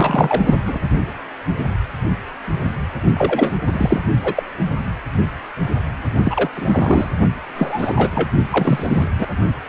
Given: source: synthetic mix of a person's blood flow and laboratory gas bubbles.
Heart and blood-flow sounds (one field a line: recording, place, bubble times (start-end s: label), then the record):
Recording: Doppler ultrasound of blood flow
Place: precordium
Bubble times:
0.00-0.57 s: bubbles
0.66-0.79 s: bubbles
3.15-3.53 s: bubbles
3.67-4.02 s: bubbles
4.24-4.43 s: bubbles
6.24-6.49 s: bubbles
6.55-7.12 s: bubbles
7.55-8.29 s: bubbles
8.52-9.08 s: bubbles
9.19-9.27 s: bubbles
From the record:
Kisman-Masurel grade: 333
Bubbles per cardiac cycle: rolling drumbeat, 9 or more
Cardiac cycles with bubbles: 50 to 99%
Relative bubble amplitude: loud (0.450 to 0.775)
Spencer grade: 3 (all of the cardiac periods contain showers or single bubble signals, but not dominating or overriding the cardiac motion signals)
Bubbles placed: only in the low amplitude regions of the cardiac cycle